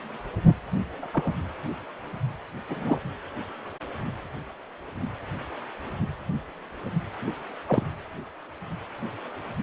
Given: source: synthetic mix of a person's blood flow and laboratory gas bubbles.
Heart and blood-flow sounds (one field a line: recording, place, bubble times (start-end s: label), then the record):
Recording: Doppler ultrasound of blood flow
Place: precordium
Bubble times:
1.02-1.08 s: bubbles
1.13-1.33 s: bubbles
2.70-2.99 s: bubbles
7.68-7.84 s: bubbles
From the record:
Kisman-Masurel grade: 122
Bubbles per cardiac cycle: 1 to 2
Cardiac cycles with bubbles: 10 to 50%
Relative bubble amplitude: moderate (0.250 to 0.450)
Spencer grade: 2 (many but less than half of the cardiac periods contain bubble signals, singularly or in groups)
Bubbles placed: anywhere in the cardiac cycle